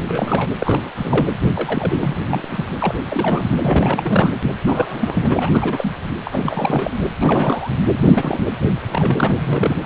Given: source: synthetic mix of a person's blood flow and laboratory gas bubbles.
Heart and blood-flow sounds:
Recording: Doppler ultrasound of blood flow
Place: precordium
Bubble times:
0.05-0.49 s: bubbles
0.59-0.89 s: bubbles
0.97-1.25 s: bubbles
1.56-2.18 s: bubbles
2.27-2.44 s: bubbles
2.51-2.63 s: bubbles
2.79-2.94 s: bubbles
3.06-3.46 s: bubbles
3.52-3.57 s: bubbles
3.60-4.35 s: bubbles
4.66-5.50 s: bubbles
5.54-5.92 s: bubbles
6.24-7.08 s: bubbles
7.20-7.71 s: bubbles
8.02-8.39 s: bubbles
8.88-9.76 s: bubbles
From the record:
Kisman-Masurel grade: 342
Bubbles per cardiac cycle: rolling drumbeat, 9 or more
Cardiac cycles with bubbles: 100%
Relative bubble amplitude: moderate (0.250 to 0.450)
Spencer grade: 3 (all of the cardiac periods contain showers or single bubble signals, but not dominating or overriding the cardiac motion signals)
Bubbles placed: anywhere in the cardiac cycle

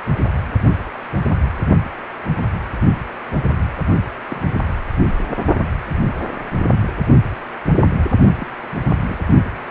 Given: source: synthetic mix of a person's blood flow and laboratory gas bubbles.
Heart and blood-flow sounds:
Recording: Doppler ultrasound of blood flow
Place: precordium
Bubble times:
4.29-4.41 s: bubbles
8.40-8.47 s: bubbles
9.06-9.19 s: bubbles
From the record:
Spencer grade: 2 (many but less than half of the cardiac periods contain bubble signals, singularly or in groups)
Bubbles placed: only in the low amplitude regions of the cardiac cycle

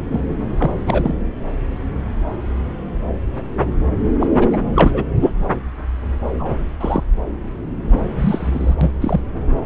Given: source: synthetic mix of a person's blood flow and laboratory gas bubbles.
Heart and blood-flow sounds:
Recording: Doppler ultrasound of blood flow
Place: subclavian vein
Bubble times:
0.10-0.20 s: bubbles
0.57-0.81 s: bubbles
0.86-1.15 s: bubbles
4.20-4.27 s: bubbles
4.35-4.48 s: bubbles
4.50-4.63 s: bubbles
4.75-4.91 s: bubbles
4.93-5.05 s: bubbles
5.21-5.30 s: bubbles
6.39-6.57 s: bubbles
6.79-7.04 s: bubbles
7.91-7.99 s: bubbles
8.21-8.75 s: bubbles
8.81-8.89 s: bubbles
9.01-9.21 s: bubbles
From the record:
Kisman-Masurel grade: 223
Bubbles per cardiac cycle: several, 3 to 8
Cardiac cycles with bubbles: 10 to 50%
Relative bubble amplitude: loud (0.450 to 0.775)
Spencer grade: 2 (many but less than half of the cardiac periods contain bubble signals, singularly or in groups)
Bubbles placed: anywhere in the cardiac cycle

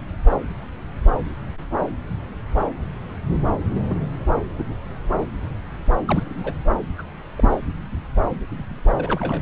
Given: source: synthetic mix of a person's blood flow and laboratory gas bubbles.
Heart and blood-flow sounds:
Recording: Doppler ultrasound of blood flow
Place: subclavian vein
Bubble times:
3.71-3.96 s: bubbles
4.58-4.63 s: bubbles
6.04-6.62 s: bubbles
6.98-7.03 s: bubbles
7.37-7.59 s: bubbles
8.97-9.42 s: bubbles
From the record:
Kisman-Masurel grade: 221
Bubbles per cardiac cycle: several, 3 to 8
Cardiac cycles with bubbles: 10 to 50%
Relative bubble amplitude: barely perceptible (0.100 to 0.250)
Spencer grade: 2 (many but less than half of the cardiac periods contain bubble signals, singularly or in groups)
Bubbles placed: anywhere in the cardiac cycle

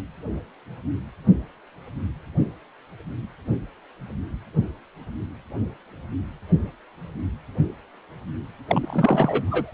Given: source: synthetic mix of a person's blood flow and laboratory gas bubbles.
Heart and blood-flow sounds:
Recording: Doppler ultrasound of blood flow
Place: precordium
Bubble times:
8.67-9.74 s: bubbles
From the record:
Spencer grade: 1 (occasional bubble signal discernible with the cardiac motion signal, with majority of cardiac periods free of bubbles)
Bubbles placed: anywhere in the cardiac cycle

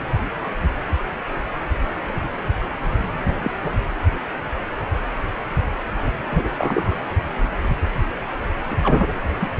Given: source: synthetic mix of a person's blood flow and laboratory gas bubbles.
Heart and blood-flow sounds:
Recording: Doppler ultrasound of blood flow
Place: precordium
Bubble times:
3.28-3.37 s: bubbles
3.42-3.51 s: bubbles
3.62-3.75 s: bubbles
6.30-6.99 s: bubbles
8.70-8.76 s: bubbles
8.83-9.05 s: bubbles
9.40-9.50 s: bubbles
From the record:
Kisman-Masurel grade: 223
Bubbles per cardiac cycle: several, 3 to 8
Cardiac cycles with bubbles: 10 to 50%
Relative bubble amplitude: loud (0.450 to 0.775)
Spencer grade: 2 (many but less than half of the cardiac periods contain bubble signals, singularly or in groups)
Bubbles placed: anywhere in the cardiac cycle

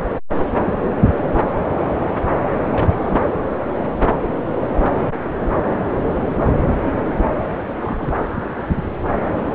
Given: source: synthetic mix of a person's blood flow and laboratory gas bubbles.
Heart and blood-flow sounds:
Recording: Doppler ultrasound of blood flow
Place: subclavian vein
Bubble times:
0.60-0.71 s: bubbles
2.72-2.86 s: bubbles
2.90-3.21 s: bubbles
7.79-8.13 s: bubbles
From the record:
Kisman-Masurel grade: 121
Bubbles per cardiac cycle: 1 to 2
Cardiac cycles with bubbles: 10 to 50%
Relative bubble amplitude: barely perceptible (0.100 to 0.250)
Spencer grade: 2 (many but less than half of the cardiac periods contain bubble signals, singularly or in groups)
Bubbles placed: anywhere in the cardiac cycle

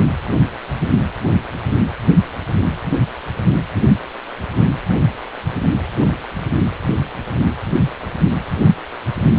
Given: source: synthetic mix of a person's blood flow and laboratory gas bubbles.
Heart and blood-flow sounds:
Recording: Doppler ultrasound of blood flow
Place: precordium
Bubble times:
0.00-0.04 s: bubbles
From the record:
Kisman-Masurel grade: 213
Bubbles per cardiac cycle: several, 3 to 8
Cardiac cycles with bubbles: 1 to 10%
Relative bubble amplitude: loud (0.450 to 0.775)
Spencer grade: 1 (occasional bubble signal discernible with the cardiac motion signal, with majority of cardiac periods free of bubbles)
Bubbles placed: anywhere in the cardiac cycle

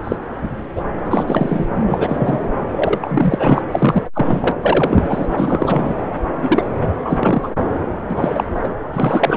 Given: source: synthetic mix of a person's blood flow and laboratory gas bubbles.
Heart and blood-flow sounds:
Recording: Doppler ultrasound of blood flow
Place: subclavian vein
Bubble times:
0.03-0.16 s: bubbles
0.75-0.82 s: bubbles
1.05-1.67 s: bubbles
1.75-1.83 s: bubbles
1.86-2.40 s: bubbles
2.71-3.62 s: bubbles
3.71-4.02 s: bubbles
4.13-4.52 s: bubbles
4.62-5.26 s: bubbles
5.37-5.95 s: bubbles
6.36-6.63 s: bubbles
7.04-7.49 s: bubbles
8.10-8.44 s: bubbles
8.63-8.69 s: bubbles
8.93-9.37 s: bubbles
From the record:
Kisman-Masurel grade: 243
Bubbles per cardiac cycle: several, 3 to 8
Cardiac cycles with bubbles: 100%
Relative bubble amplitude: loud (0.450 to 0.775)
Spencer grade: 3 (all of the cardiac periods contain showers or single bubble signals, but not dominating or overriding the cardiac motion signals)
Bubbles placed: anywhere in the cardiac cycle

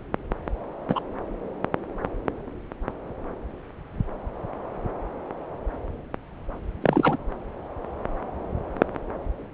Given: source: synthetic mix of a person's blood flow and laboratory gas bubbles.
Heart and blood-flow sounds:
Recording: Doppler ultrasound of blood flow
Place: subclavian vein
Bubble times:
0.89-1.00 s: bubbles
6.82-7.17 s: bubbles
From the record:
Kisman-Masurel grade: 123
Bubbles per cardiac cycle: 1 to 2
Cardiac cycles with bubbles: 10 to 50%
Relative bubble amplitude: loud (0.450 to 0.775)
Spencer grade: 2 (many but less than half of the cardiac periods contain bubble signals, singularly or in groups)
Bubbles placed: anywhere in the cardiac cycle

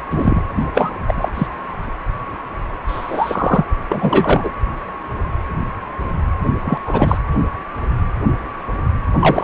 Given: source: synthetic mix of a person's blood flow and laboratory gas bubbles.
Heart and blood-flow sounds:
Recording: Doppler ultrasound of blood flow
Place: precordium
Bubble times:
0.10-0.41 s: bubbles
0.56-0.63 s: bubbles
0.74-0.91 s: bubbles
1.07-1.14 s: bubbles
1.18-1.29 s: bubbles
1.34-1.47 s: bubbles
2.88-3.65 s: bubbles
3.92-4.51 s: bubbles
6.64-6.79 s: bubbles
6.87-7.17 s: bubbles
9.19-9.44 s: bubbles
From the record:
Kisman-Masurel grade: 223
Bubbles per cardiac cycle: several, 3 to 8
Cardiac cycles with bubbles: 10 to 50%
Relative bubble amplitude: loud (0.450 to 0.775)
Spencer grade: 2 (many but less than half of the cardiac periods contain bubble signals, singularly or in groups)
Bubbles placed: anywhere in the cardiac cycle

